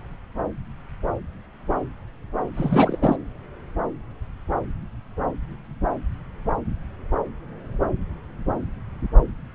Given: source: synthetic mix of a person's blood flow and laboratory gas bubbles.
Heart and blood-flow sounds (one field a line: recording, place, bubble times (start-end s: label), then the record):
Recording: Doppler ultrasound of blood flow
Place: subclavian vein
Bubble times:
2.54-3.16 s: bubbles
From the record:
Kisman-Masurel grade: 222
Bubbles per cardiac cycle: several, 3 to 8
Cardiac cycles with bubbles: 10 to 50%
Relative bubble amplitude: moderate (0.250 to 0.450)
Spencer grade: 2 (many but less than half of the cardiac periods contain bubble signals, singularly or in groups)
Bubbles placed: anywhere in the cardiac cycle